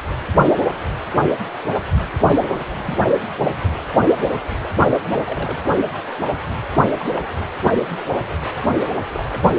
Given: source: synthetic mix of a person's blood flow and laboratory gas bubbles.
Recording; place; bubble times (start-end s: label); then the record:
Doppler ultrasound of blood flow; precordium
2.19-2.67 s: bubbles
2.77-3.07 s: bubbles
5.00-5.59 s: bubbles
5.73-5.85 s: bubbles
6.97-7.05 s: bubbles
7.10-7.26 s: bubbles
7.62-7.85 s: bubbles
7.89-8.23 s: bubbles
8.76-8.80 s: bubbles
9.14-9.24 s: bubbles
9.29-9.43 s: bubbles
From the record:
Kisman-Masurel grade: 221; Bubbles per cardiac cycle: several, 3 to 8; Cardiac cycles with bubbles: 10 to 50%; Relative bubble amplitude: barely perceptible (0.100 to 0.250); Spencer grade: 2 (many but less than half of the cardiac periods contain bubble signals, singularly or in groups); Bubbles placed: anywhere in the cardiac cycle